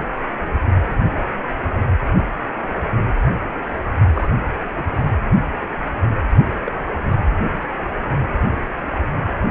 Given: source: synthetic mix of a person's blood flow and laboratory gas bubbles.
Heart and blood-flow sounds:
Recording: Doppler ultrasound of blood flow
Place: precordium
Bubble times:
4.13-4.30 s: bubbles
4.75-4.83 s: bubbles
6.66-6.72 s: bubbles
From the record:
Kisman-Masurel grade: 121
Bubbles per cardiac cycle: 1 to 2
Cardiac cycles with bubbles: 10 to 50%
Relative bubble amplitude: barely perceptible (0.100 to 0.250)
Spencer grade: 2 (many but less than half of the cardiac periods contain bubble signals, singularly or in groups)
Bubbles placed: only in the low amplitude regions of the cardiac cycle

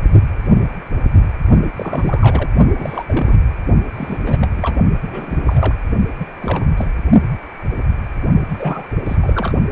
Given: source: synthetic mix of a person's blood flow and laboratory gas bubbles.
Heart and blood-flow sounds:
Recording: Doppler ultrasound of blood flow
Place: precordium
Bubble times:
1.76-2.50 s: bubbles
2.79-3.43 s: bubbles
3.94-4.22 s: bubbles
4.25-4.48 s: bubbles
4.57-4.77 s: bubbles
5.01-5.75 s: bubbles
6.18-6.28 s: bubbles
6.40-6.67 s: bubbles
6.77-6.88 s: bubbles
8.48-8.86 s: bubbles
9.06-9.17 s: bubbles
9.21-9.54 s: bubbles
From the record:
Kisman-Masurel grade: 332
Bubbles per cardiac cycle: rolling drumbeat, 9 or more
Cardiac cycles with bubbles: 50 to 99%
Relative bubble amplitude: moderate (0.250 to 0.450)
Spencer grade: 3 (all of the cardiac periods contain showers or single bubble signals, but not dominating or overriding the cardiac motion signals)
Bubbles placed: only in the low amplitude regions of the cardiac cycle

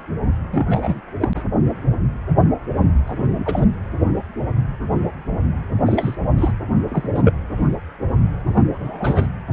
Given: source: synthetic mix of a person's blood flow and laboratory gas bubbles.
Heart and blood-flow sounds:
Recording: Doppler ultrasound of blood flow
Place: precordium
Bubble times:
0.00-0.03 s: bubbles
0.53-1.01 s: bubbles
1.20-1.28 s: bubbles
1.35-1.43 s: bubbles
3.07-3.66 s: bubbles
5.86-6.17 s: bubbles
6.36-6.52 s: bubbles
6.88-7.09 s: bubbles
7.14-7.22 s: bubbles
7.25-7.33 s: bubbles
8.49-8.69 s: bubbles
8.73-9.27 s: bubbles
From the record:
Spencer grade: 3 (all of the cardiac periods contain showers or single bubble signals, but not dominating or overriding the cardiac motion signals)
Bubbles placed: anywhere in the cardiac cycle

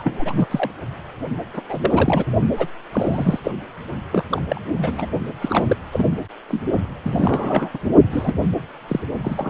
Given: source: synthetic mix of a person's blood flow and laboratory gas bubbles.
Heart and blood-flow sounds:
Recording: Doppler ultrasound of blood flow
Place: precordium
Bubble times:
0.00-0.47 s: bubbles
0.51-0.70 s: bubbles
1.54-1.62 s: bubbles
1.69-2.25 s: bubbles
2.57-2.67 s: bubbles
2.92-3.40 s: bubbles
3.44-3.51 s: bubbles
4.12-4.25 s: bubbles
4.29-4.42 s: bubbles
4.49-4.61 s: bubbles
4.75-5.08 s: bubbles
5.41-5.77 s: bubbles
5.92-6.24 s: bubbles
6.48-6.62 s: bubbles
7.03-7.70 s: bubbles
7.74-7.78 s: bubbles
8.10-8.34 s: bubbles
8.88-9.00 s: bubbles
9.22-9.49 s: bubbles
From the record:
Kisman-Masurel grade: 342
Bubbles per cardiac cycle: rolling drumbeat, 9 or more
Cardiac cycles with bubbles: 100%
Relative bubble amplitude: moderate (0.250 to 0.450)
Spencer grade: 3 (all of the cardiac periods contain showers or single bubble signals, but not dominating or overriding the cardiac motion signals)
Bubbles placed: only in the low amplitude regions of the cardiac cycle

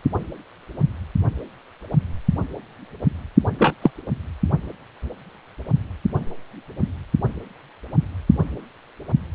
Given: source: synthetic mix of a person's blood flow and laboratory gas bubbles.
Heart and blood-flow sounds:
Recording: Doppler ultrasound of blood flow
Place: precordium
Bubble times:
3.58-3.73 s: bubbles
3.81-3.91 s: bubbles
From the record:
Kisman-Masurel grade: 123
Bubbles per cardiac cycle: 1 to 2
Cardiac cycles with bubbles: 10 to 50%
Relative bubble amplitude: loud (0.450 to 0.775)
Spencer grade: 2 (many but less than half of the cardiac periods contain bubble signals, singularly or in groups)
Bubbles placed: only in the low amplitude regions of the cardiac cycle

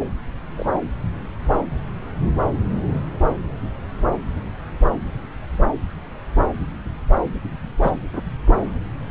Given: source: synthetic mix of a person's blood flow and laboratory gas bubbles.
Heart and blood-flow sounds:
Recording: Doppler ultrasound of blood flow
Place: subclavian vein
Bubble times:
0.57-0.79 s: bubbles
7.82-7.90 s: bubbles
8.12-8.22 s: bubbles
8.47-8.54 s: bubbles
From the record:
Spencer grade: 2 (many but less than half of the cardiac periods contain bubble signals, singularly or in groups)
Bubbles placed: anywhere in the cardiac cycle

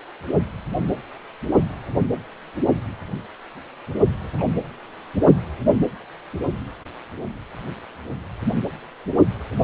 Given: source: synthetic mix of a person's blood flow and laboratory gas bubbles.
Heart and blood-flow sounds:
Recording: Doppler ultrasound of blood flow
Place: precordium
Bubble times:
4.38-4.44 s: bubbles
From the record:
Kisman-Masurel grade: 111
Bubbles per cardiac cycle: 1 to 2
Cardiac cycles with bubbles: 1 to 10%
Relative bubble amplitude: barely perceptible (0.100 to 0.250)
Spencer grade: 1 (occasional bubble signal discernible with the cardiac motion signal, with majority of cardiac periods free of bubbles)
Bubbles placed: only in the low amplitude regions of the cardiac cycle

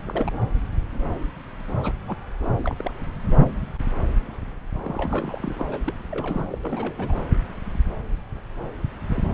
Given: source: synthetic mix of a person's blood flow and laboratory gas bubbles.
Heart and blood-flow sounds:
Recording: Doppler ultrasound of blood flow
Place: subclavian vein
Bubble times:
0.05-0.33 s: bubbles
1.83-1.93 s: bubbles
2.07-2.17 s: bubbles
2.62-2.75 s: bubbles
2.78-2.92 s: bubbles
4.82-5.64 s: bubbles
5.71-5.79 s: bubbles
5.85-5.93 s: bubbles
6.10-6.47 s: bubbles
6.51-6.58 s: bubbles
6.62-7.15 s: bubbles
9.10-9.29 s: bubbles
From the record:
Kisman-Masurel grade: 221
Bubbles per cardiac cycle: several, 3 to 8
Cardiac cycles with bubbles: 10 to 50%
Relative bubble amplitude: barely perceptible (0.100 to 0.250)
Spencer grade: 2 (many but less than half of the cardiac periods contain bubble signals, singularly or in groups)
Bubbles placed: anywhere in the cardiac cycle

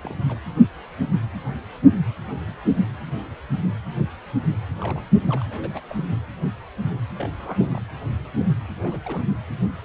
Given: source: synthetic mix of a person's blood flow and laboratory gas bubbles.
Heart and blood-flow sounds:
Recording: Doppler ultrasound of blood flow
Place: precordium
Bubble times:
0.03-0.15 s: bubbles
0.28-0.39 s: bubbles
4.81-5.01 s: bubbles
5.28-5.42 s: bubbles
5.50-5.80 s: bubbles
5.89-6.01 s: bubbles
6.07-6.16 s: bubbles
7.17-7.30 s: bubbles
7.38-7.82 s: bubbles
8.83-9.00 s: bubbles
9.04-9.26 s: bubbles
9.30-9.37 s: bubbles
From the record:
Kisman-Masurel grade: 221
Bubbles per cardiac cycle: several, 3 to 8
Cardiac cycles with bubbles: 10 to 50%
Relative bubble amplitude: barely perceptible (0.100 to 0.250)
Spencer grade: 2 (many but less than half of the cardiac periods contain bubble signals, singularly or in groups)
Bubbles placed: anywhere in the cardiac cycle

